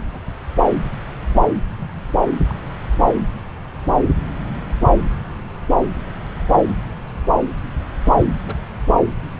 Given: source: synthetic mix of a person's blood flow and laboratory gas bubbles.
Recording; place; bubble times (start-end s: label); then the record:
Doppler ultrasound of blood flow; subclavian vein
0.14-0.20 s: bubbles
1.80-2.01 s: bubbles
2.46-2.55 s: bubbles
5.76-5.85 s: bubbles
8.04-8.12 s: bubbles
8.14-8.28 s: bubbles
8.46-8.58 s: bubbles
From the record:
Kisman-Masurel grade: 121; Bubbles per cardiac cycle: 1 to 2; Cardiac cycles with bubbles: 10 to 50%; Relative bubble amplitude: barely perceptible (0.100 to 0.250); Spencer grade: 2 (many but less than half of the cardiac periods contain bubble signals, singularly or in groups); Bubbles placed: anywhere in the cardiac cycle